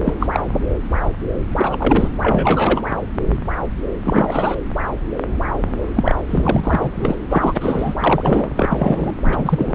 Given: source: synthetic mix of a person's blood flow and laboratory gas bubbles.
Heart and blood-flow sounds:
Doppler ultrasound of blood flow; subclavian vein
0.04-0.14 s: bubbles
0.20-0.27 s: bubbles
0.32-0.41 s: bubbles
1.55-2.08 s: bubbles
2.21-2.81 s: bubbles
4.04-4.54 s: bubbles
5.95-6.16 s: bubbles
6.26-7.15 s: bubbles
7.29-8.48 s: bubbles
8.55-9.14 s: bubbles
9.19-9.75 s: bubbles
From the record:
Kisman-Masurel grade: 233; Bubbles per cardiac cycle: several, 3 to 8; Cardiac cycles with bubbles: 50 to 99%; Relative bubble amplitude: loud (0.450 to 0.775); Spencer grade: 3 (all of the cardiac periods contain showers or single bubble signals, but not dominating or overriding the cardiac motion signals); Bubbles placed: anywhere in the cardiac cycle

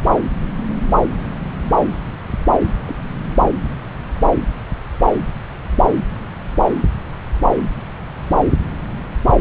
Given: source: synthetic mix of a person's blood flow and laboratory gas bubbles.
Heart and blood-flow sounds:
Doppler ultrasound of blood flow; subclavian vein
2.85-2.96 s: bubbles
From the record:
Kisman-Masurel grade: 112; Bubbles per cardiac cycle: 1 to 2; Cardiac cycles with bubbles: 1 to 10%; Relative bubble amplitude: moderate (0.250 to 0.450); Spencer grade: 1 (occasional bubble signal discernible with the cardiac motion signal, with majority of cardiac periods free of bubbles); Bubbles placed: anywhere in the cardiac cycle

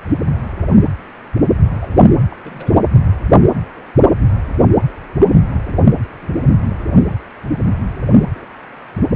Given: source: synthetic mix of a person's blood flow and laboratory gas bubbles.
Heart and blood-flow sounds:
Doppler ultrasound of blood flow; precordium
1.81-2.09 s: bubbles
2.30-2.35 s: bubbles
2.44-2.71 s: bubbles
5.18-5.25 s: bubbles
6.22-6.29 s: bubbles
8.34-8.45 s: bubbles
From the record:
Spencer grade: 2 (many but less than half of the cardiac periods contain bubble signals, singularly or in groups); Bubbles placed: anywhere in the cardiac cycle

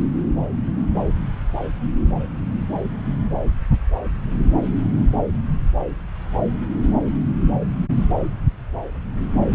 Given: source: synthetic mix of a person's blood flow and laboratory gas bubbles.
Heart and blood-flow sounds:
Doppler ultrasound of blood flow; subclavian vein
no bubbles
From the record:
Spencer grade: 0 (complete lack of bubble signals)

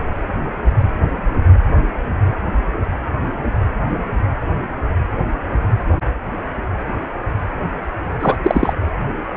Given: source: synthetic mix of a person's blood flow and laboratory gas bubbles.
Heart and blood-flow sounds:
Doppler ultrasound of blood flow; precordium
8.20-8.37 s: bubbles
8.43-8.74 s: bubbles
From the record:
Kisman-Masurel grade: 213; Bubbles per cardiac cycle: several, 3 to 8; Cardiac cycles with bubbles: 1 to 10%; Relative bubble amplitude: loud (0.450 to 0.775); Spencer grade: 1 (occasional bubble signal discernible with the cardiac motion signal, with majority of cardiac periods free of bubbles); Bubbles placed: anywhere in the cardiac cycle

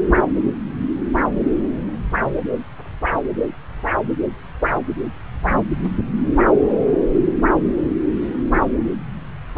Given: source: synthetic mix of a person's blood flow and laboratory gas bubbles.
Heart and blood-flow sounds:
Doppler ultrasound of blood flow; subclavian vein
no bubbles
From the record:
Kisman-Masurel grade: 000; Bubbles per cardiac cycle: 0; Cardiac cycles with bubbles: 0%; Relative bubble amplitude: no bubbles discernible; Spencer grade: 0 (complete lack of bubble signals)

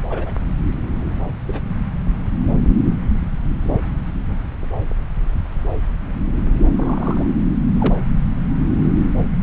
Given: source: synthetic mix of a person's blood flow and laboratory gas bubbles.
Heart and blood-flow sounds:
Doppler ultrasound of blood flow; subclavian vein
0.09-0.33 s: bubbles
1.48-1.60 s: bubbles
6.75-7.25 s: bubbles
7.79-7.95 s: bubbles
From the record:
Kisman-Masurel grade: 121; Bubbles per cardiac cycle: 1 to 2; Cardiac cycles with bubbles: 10 to 50%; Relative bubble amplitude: barely perceptible (0.100 to 0.250); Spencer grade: 2 (many but less than half of the cardiac periods contain bubble signals, singularly or in groups); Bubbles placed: anywhere in the cardiac cycle

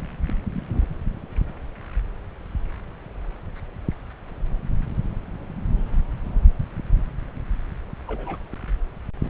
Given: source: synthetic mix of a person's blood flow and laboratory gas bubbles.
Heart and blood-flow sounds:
Doppler ultrasound of blood flow; subclavian vein
0.27-0.30 s: bubbles
0.55-0.86 s: bubbles
8.07-8.37 s: bubbles
From the record:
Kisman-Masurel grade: 121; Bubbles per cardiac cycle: 1 to 2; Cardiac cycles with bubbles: 10 to 50%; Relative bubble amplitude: barely perceptible (0.100 to 0.250); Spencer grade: 2 (many but less than half of the cardiac periods contain bubble signals, singularly or in groups); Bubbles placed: anywhere in the cardiac cycle

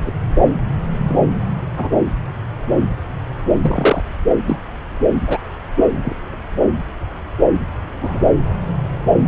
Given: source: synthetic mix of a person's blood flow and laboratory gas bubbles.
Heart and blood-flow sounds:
Doppler ultrasound of blood flow; subclavian vein
0.05-0.12 s: bubbles
1.09-1.17 s: bubbles
1.76-1.89 s: bubbles
3.62-4.02 s: bubbles
4.46-4.59 s: bubbles
5.29-5.39 s: bubbles
5.94-6.13 s: bubbles
8.01-8.19 s: bubbles
From the record:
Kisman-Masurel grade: 123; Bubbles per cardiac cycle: 1 to 2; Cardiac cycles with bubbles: 10 to 50%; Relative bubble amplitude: loud (0.450 to 0.775); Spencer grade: 2 (many but less than half of the cardiac periods contain bubble signals, singularly or in groups); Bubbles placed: anywhere in the cardiac cycle

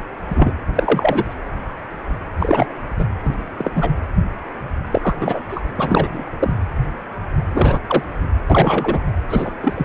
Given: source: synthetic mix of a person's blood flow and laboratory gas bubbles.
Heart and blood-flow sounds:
Doppler ultrasound of blood flow; precordium
0.31-0.54 s: bubbles
0.75-1.36 s: bubbles
2.39-2.67 s: bubbles
2.99-3.04 s: bubbles
3.25-3.33 s: bubbles
3.58-3.71 s: bubbles
3.76-3.91 s: bubbles
4.91-5.15 s: bubbles
5.20-5.42 s: bubbles
5.49-5.61 s: bubbles
5.76-6.24 s: bubbles
6.39-6.55 s: bubbles
7.54-7.79 s: bubbles
7.88-8.03 s: bubbles
8.50-9.04 s: bubbles
9.30-9.51 s: bubbles
9.62-9.85 s: bubbles
From the record:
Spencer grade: 3 (all of the cardiac periods contain showers or single bubble signals, but not dominating or overriding the cardiac motion signals); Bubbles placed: anywhere in the cardiac cycle

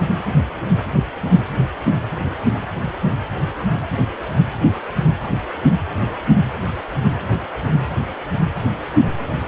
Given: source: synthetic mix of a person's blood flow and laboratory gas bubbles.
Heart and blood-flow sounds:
Doppler ultrasound of blood flow; precordium
no bubbles
From the record:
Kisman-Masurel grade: 000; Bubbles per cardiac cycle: 0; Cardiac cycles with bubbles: 0%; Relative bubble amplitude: no bubbles discernible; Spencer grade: 0 (complete lack of bubble signals)

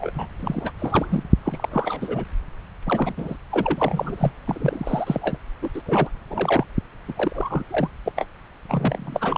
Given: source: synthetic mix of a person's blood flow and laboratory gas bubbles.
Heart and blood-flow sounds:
Doppler ultrasound of blood flow; subclavian vein
0.00-0.11 s: bubbles
0.14-0.27 s: bubbles
0.39-0.72 s: bubbles
0.78-1.24 s: bubbles
1.45-2.25 s: bubbles
2.86-3.37 s: bubbles
3.51-4.32 s: bubbles
4.47-5.38 s: bubbles
5.62-5.70 s: bubbles
5.74-5.82 s: bubbles
5.86-6.10 s: bubbles
6.30-6.65 s: bubbles
7.08-7.13 s: bubbles
7.17-7.63 s: bubbles
7.71-7.90 s: bubbles
8.05-8.12 s: bubbles
8.16-8.26 s: bubbles
8.68-9.38 s: bubbles
From the record:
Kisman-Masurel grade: 342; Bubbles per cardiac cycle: rolling drumbeat, 9 or more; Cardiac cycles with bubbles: 100%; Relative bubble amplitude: moderate (0.250 to 0.450); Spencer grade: 3 (all of the cardiac periods contain showers or single bubble signals, but not dominating or overriding the cardiac motion signals); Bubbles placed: anywhere in the cardiac cycle

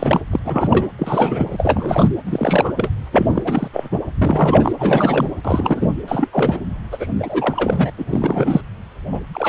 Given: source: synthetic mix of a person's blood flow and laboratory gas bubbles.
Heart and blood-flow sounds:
Doppler ultrasound of blood flow; precordium
0.00-0.21 s: bubbles
0.31-0.39 s: bubbles
0.45-0.89 s: bubbles
0.99-2.08 s: bubbles
2.25-2.73 s: bubbles
2.77-2.92 s: bubbles
3.12-3.68 s: bubbles
3.73-3.88 s: bubbles
3.91-3.99 s: bubbles
4.17-4.72 s: bubbles
4.79-5.27 s: bubbles
5.45-5.90 s: bubbles
6.08-6.29 s: bubbles
6.32-6.58 s: bubbles
6.92-7.07 s: bubbles
7.19-7.90 s: bubbles
7.98-8.05 s: bubbles
8.07-8.61 s: bubbles
9.12-9.20 s: bubbles
9.34-9.49 s: bubbles
From the record:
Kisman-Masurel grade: 343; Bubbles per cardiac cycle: rolling drumbeat, 9 or more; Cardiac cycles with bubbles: 100%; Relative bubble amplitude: loud (0.450 to 0.775); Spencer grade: 3 (all of the cardiac periods contain showers or single bubble signals, but not dominating or overriding the cardiac motion signals); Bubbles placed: anywhere in the cardiac cycle

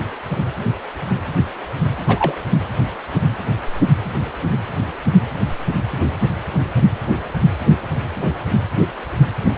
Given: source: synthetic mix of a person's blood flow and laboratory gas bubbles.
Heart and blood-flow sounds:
Doppler ultrasound of blood flow; precordium
2.08-2.42 s: bubbles
From the record:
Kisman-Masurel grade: 113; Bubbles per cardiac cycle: 1 to 2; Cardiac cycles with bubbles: 1 to 10%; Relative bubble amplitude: loud (0.450 to 0.775); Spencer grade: 1 (occasional bubble signal discernible with the cardiac motion signal, with majority of cardiac periods free of bubbles); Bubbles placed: anywhere in the cardiac cycle

